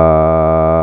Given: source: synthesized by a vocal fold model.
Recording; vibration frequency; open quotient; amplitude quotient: sustained vowel; 80 Hz; 0.4; 1.1